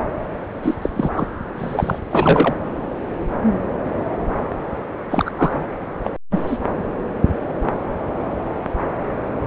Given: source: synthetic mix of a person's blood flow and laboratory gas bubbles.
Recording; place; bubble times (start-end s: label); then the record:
Doppler ultrasound of blood flow; subclavian vein
0.62-0.74 s: bubbles
0.82-1.28 s: bubbles
1.58-1.99 s: bubbles
2.10-2.54 s: bubbles
5.10-5.32 s: bubbles
5.38-5.64 s: bubbles
6.04-6.10 s: bubbles
6.30-6.42 s: bubbles
6.46-6.58 s: bubbles
From the record:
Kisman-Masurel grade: 223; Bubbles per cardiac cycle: several, 3 to 8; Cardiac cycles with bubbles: 10 to 50%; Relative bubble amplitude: loud (0.450 to 0.775); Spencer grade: 2 (many but less than half of the cardiac periods contain bubble signals, singularly or in groups); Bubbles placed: anywhere in the cardiac cycle